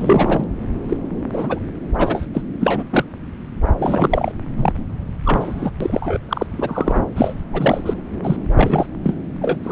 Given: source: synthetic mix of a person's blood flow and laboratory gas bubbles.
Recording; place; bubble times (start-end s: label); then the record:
Doppler ultrasound of blood flow; subclavian vein
0.00-0.44 s: bubbles
0.88-0.96 s: bubbles
1.33-1.59 s: bubbles
1.98-2.26 s: bubbles
2.34-2.42 s: bubbles
2.60-2.83 s: bubbles
2.90-3.04 s: bubbles
3.79-4.32 s: bubbles
4.56-4.72 s: bubbles
5.23-5.70 s: bubbles
5.80-6.18 s: bubbles
6.29-6.46 s: bubbles
6.51-7.01 s: bubbles
7.16-7.34 s: bubbles
7.53-7.81 s: bubbles
7.86-7.94 s: bubbles
8.23-8.37 s: bubbles
8.55-8.87 s: bubbles
9.04-9.16 s: bubbles
9.41-9.57 s: bubbles
9.63-9.72 s: bubbles
From the record:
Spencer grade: 3 (all of the cardiac periods contain showers or single bubble signals, but not dominating or overriding the cardiac motion signals); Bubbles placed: anywhere in the cardiac cycle